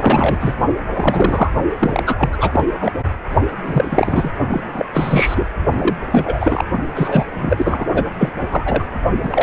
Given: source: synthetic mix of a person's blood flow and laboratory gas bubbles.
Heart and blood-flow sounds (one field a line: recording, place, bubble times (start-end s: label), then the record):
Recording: Doppler ultrasound of blood flow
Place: precordium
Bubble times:
0.00-0.56 s: bubbles
0.93-1.51 s: bubbles
1.79-2.29 s: bubbles
2.33-2.66 s: bubbles
2.81-2.94 s: bubbles
3.64-4.31 s: bubbles
4.50-4.64 s: bubbles
4.73-4.85 s: bubbles
4.93-5.46 s: bubbles
5.72-5.96 s: bubbles
6.10-6.63 s: bubbles
6.95-7.25 s: bubbles
7.35-7.86 s: bubbles
7.93-8.04 s: bubbles
8.14-8.29 s: bubbles
8.41-8.47 s: bubbles
8.51-8.85 s: bubbles
9.23-9.42 s: bubbles
From the record:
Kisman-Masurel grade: 343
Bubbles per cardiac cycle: rolling drumbeat, 9 or more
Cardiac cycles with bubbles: 100%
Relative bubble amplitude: loud (0.450 to 0.775)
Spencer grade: 3 (all of the cardiac periods contain showers or single bubble signals, but not dominating or overriding the cardiac motion signals)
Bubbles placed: only in the low amplitude regions of the cardiac cycle